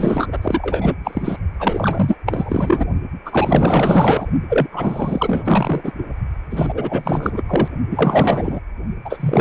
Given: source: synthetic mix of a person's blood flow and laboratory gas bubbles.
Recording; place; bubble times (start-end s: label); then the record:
Doppler ultrasound of blood flow; precordium
0.00-0.28 s: bubbles
0.32-0.39 s: bubbles
0.42-0.95 s: bubbles
1.04-1.39 s: bubbles
1.59-2.17 s: bubbles
2.26-2.85 s: bubbles
3.26-4.27 s: bubbles
4.49-4.67 s: bubbles
4.71-5.92 s: bubbles
5.98-6.03 s: bubbles
6.50-7.42 s: bubbles
7.47-7.68 s: bubbles
7.91-8.60 s: bubbles
9.04-9.41 s: bubbles
From the record:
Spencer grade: 4 (maximum detectable bubble signal sounding continuously throughout systole and diastole of every cardiac period, and overriding the amplitude of the normal cardiac signals); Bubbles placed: only in the low amplitude regions of the cardiac cycle